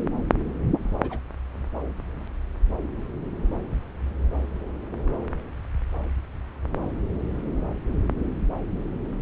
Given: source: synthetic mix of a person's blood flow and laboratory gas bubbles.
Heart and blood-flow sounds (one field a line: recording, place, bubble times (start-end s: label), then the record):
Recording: Doppler ultrasound of blood flow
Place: subclavian vein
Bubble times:
0.77-0.91 s: bubbles
1.01-1.20 s: bubbles
From the record:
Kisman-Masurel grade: 111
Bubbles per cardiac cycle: 1 to 2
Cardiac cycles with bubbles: 1 to 10%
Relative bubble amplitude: barely perceptible (0.100 to 0.250)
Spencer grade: 1 (occasional bubble signal discernible with the cardiac motion signal, with majority of cardiac periods free of bubbles)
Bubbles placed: anywhere in the cardiac cycle